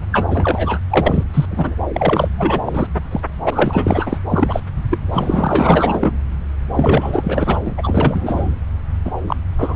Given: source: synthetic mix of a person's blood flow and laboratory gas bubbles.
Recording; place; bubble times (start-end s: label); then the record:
Doppler ultrasound of blood flow; subclavian vein
0.12-0.79 s: bubbles
0.91-1.24 s: bubbles
1.33-1.46 s: bubbles
1.51-1.75 s: bubbles
1.94-2.28 s: bubbles
2.38-2.60 s: bubbles
2.66-2.87 s: bubbles
3.11-3.21 s: bubbles
3.46-4.18 s: bubbles
4.30-4.60 s: bubbles
4.90-4.98 s: bubbles
5.12-6.11 s: bubbles
6.76-7.59 s: bubbles
7.66-7.74 s: bubbles
7.77-8.55 s: bubbles
9.04-9.12 s: bubbles
9.27-9.36 s: bubbles
9.58-9.76 s: bubbles
From the record:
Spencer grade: 4 (maximum detectable bubble signal sounding continuously throughout systole and diastole of every cardiac period, and overriding the amplitude of the normal cardiac signals); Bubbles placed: anywhere in the cardiac cycle